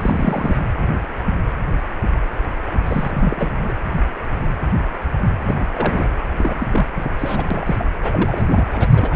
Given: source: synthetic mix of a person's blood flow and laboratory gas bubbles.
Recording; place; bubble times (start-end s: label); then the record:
Doppler ultrasound of blood flow; precordium
0.00-0.57 s: bubbles
2.85-3.52 s: bubbles
3.64-3.73 s: bubbles
5.44-5.55 s: bubbles
5.60-5.66 s: bubbles
5.74-6.04 s: bubbles
6.38-6.67 s: bubbles
6.70-6.87 s: bubbles
6.96-7.12 s: bubbles
7.19-7.45 s: bubbles
7.50-7.89 s: bubbles
8.01-8.65 s: bubbles
8.72-8.88 s: bubbles
8.91-9.16 s: bubbles
From the record:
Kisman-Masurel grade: 332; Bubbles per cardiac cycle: rolling drumbeat, 9 or more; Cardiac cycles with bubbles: 50 to 99%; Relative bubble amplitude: moderate (0.250 to 0.450); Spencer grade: 3 (all of the cardiac periods contain showers or single bubble signals, but not dominating or overriding the cardiac motion signals); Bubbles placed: anywhere in the cardiac cycle